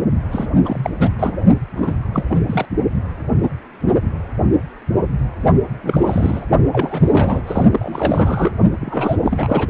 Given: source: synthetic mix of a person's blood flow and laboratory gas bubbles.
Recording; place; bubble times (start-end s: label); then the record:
Doppler ultrasound of blood flow; precordium
0.31-0.48 s: bubbles
0.65-0.90 s: bubbles
1.00-1.09 s: bubbles
1.19-1.35 s: bubbles
1.75-1.96 s: bubbles
2.13-2.25 s: bubbles
2.30-2.40 s: bubbles
2.46-2.65 s: bubbles
5.83-6.45 s: bubbles
6.72-7.42 s: bubbles
7.46-7.63 s: bubbles
7.72-8.52 s: bubbles
8.81-9.17 s: bubbles
9.22-9.69 s: bubbles
From the record:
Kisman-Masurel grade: 332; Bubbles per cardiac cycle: rolling drumbeat, 9 or more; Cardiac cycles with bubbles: 50 to 99%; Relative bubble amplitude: moderate (0.250 to 0.450); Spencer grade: 3 (all of the cardiac periods contain showers or single bubble signals, but not dominating or overriding the cardiac motion signals); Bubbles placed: only in the low amplitude regions of the cardiac cycle